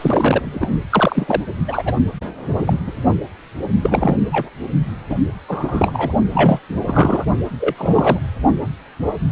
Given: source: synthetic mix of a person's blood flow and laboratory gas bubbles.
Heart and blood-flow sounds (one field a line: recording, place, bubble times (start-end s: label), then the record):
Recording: Doppler ultrasound of blood flow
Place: precordium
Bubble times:
0.00-0.67 s: bubbles
0.90-1.41 s: bubbles
1.68-1.83 s: bubbles
1.85-1.94 s: bubbles
2.54-2.63 s: bubbles
2.66-2.74 s: bubbles
2.87-2.92 s: bubbles
3.83-4.17 s: bubbles
4.31-4.50 s: bubbles
5.09-5.16 s: bubbles
5.48-6.13 s: bubbles
6.33-6.59 s: bubbles
6.87-7.25 s: bubbles
7.60-7.75 s: bubbles
7.78-8.19 s: bubbles
From the record:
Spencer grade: 3 (all of the cardiac periods contain showers or single bubble signals, but not dominating or overriding the cardiac motion signals)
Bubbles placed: only in the low amplitude regions of the cardiac cycle